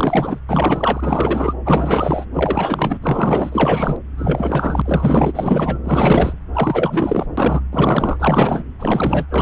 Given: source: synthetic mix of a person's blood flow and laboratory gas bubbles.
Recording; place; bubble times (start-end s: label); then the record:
Doppler ultrasound of blood flow; subclavian vein
0.00-0.39 s: bubbles
0.49-1.54 s: bubbles
1.65-2.25 s: bubbles
2.33-2.97 s: bubbles
3.01-3.96 s: bubbles
4.17-4.82 s: bubbles
4.84-5.78 s: bubbles
5.83-6.33 s: bubbles
6.53-7.26 s: bubbles
7.37-7.62 s: bubbles
7.71-8.62 s: bubbles
8.79-9.26 s: bubbles
9.29-9.42 s: bubbles
From the record:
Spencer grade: 4 (maximum detectable bubble signal sounding continuously throughout systole and diastole of every cardiac period, and overriding the amplitude of the normal cardiac signals); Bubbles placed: anywhere in the cardiac cycle